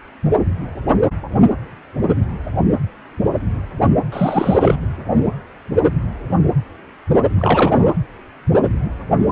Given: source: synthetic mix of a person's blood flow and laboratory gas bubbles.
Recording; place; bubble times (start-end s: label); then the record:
Doppler ultrasound of blood flow; precordium
4.12-4.76 s: bubbles
7.38-7.92 s: bubbles
From the record:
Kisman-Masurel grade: 223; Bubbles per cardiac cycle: several, 3 to 8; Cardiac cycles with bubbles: 10 to 50%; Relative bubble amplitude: loud (0.450 to 0.775); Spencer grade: 2 (many but less than half of the cardiac periods contain bubble signals, singularly or in groups); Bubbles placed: anywhere in the cardiac cycle